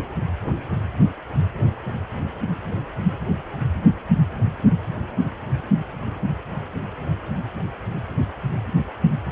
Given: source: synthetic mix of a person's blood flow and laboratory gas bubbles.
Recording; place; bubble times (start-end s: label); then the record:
Doppler ultrasound of blood flow; precordium
no bubbles
From the record:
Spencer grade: 0 (complete lack of bubble signals)